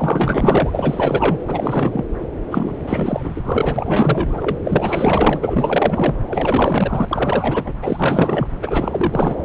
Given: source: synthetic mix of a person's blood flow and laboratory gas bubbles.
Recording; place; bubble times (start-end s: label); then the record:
Doppler ultrasound of blood flow; subclavian vein
0.00-0.70 s: bubbles
0.73-1.38 s: bubbles
1.47-2.05 s: bubbles
2.51-2.75 s: bubbles
2.86-4.58 s: bubbles
4.65-6.15 s: bubbles
6.27-7.05 s: bubbles
7.08-7.75 s: bubbles
7.80-8.47 s: bubbles
8.61-9.36 s: bubbles
From the record:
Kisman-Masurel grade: 444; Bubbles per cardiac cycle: continuous sound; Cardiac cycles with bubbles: 100%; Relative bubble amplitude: maximal (0.775 to 0.999); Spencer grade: 4 (maximum detectable bubble signal sounding continuously throughout systole and diastole of every cardiac period, and overriding the amplitude of the normal cardiac signals); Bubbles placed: anywhere in the cardiac cycle